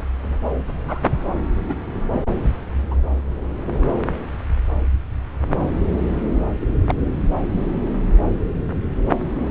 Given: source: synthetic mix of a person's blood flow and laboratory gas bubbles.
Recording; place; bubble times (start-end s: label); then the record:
Doppler ultrasound of blood flow; subclavian vein
0.69-1.02 s: bubbles
1.69-1.76 s: bubbles
2.13-2.19 s: bubbles
2.90-2.95 s: bubbles
6.60-6.67 s: bubbles
6.87-6.95 s: bubbles
From the record:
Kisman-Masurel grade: 122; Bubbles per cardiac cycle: 1 to 2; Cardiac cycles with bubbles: 10 to 50%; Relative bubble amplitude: moderate (0.250 to 0.450); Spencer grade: 2 (many but less than half of the cardiac periods contain bubble signals, singularly or in groups); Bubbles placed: anywhere in the cardiac cycle